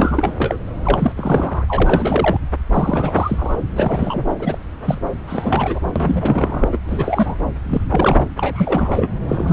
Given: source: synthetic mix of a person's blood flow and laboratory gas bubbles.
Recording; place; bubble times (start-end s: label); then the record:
Doppler ultrasound of blood flow; subclavian vein
0.00-0.34 s: bubbles
0.37-0.57 s: bubbles
0.83-1.12 s: bubbles
1.17-1.64 s: bubbles
1.68-2.37 s: bubbles
2.72-3.55 s: bubbles
3.76-4.25 s: bubbles
4.39-4.58 s: bubbles
4.84-4.98 s: bubbles
5.27-5.79 s: bubbles
5.96-6.68 s: bubbles
6.72-6.79 s: bubbles
6.85-7.35 s: bubbles
7.65-7.81 s: bubbles
7.89-8.24 s: bubbles
8.37-9.09 s: bubbles
9.29-9.53 s: bubbles
From the record:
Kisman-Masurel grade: 343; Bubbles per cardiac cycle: rolling drumbeat, 9 or more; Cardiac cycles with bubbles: 100%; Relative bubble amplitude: loud (0.450 to 0.775); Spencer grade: 3 (all of the cardiac periods contain showers or single bubble signals, but not dominating or overriding the cardiac motion signals); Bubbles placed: anywhere in the cardiac cycle